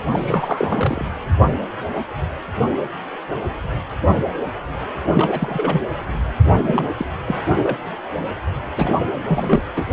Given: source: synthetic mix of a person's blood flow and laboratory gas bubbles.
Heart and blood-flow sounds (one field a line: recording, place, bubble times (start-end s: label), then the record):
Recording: Doppler ultrasound of blood flow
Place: precordium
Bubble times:
0.11-1.04 s: bubbles
5.14-5.81 s: bubbles
6.45-6.88 s: bubbles
6.97-7.06 s: bubbles
7.27-7.40 s: bubbles
7.56-7.78 s: bubbles
8.76-8.98 s: bubbles
9.27-9.61 s: bubbles
9.76-9.85 s: bubbles
From the record:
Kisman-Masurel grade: 332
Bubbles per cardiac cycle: rolling drumbeat, 9 or more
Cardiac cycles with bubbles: 50 to 99%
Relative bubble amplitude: moderate (0.250 to 0.450)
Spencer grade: 3 (all of the cardiac periods contain showers or single bubble signals, but not dominating or overriding the cardiac motion signals)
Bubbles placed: anywhere in the cardiac cycle